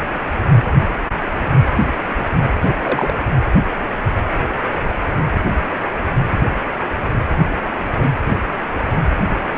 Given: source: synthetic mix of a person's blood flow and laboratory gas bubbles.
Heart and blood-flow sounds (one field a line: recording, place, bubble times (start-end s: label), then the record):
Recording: Doppler ultrasound of blood flow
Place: precordium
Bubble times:
2.59-2.75 s: bubbles
2.83-3.14 s: bubbles
From the record:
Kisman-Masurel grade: 212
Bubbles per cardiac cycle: several, 3 to 8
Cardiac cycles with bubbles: 1 to 10%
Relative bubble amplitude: moderate (0.250 to 0.450)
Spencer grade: 1 (occasional bubble signal discernible with the cardiac motion signal, with majority of cardiac periods free of bubbles)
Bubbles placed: anywhere in the cardiac cycle